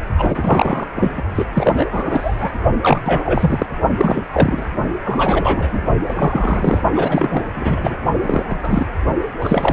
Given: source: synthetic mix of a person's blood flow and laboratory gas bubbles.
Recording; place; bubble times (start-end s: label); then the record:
Doppler ultrasound of blood flow; precordium
0.17-0.88 s: bubbles
0.96-1.22 s: bubbles
1.34-1.45 s: bubbles
1.54-1.85 s: bubbles
1.90-2.50 s: bubbles
2.82-3.67 s: bubbles
3.97-4.25 s: bubbles
4.33-4.63 s: bubbles
5.04-5.83 s: bubbles
6.08-6.83 s: bubbles
6.93-7.42 s: bubbles
7.50-7.97 s: bubbles
8.21-8.44 s: bubbles
8.48-8.87 s: bubbles
9.39-9.73 s: bubbles
From the record:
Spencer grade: 3 (all of the cardiac periods contain showers or single bubble signals, but not dominating or overriding the cardiac motion signals); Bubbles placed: only in the low amplitude regions of the cardiac cycle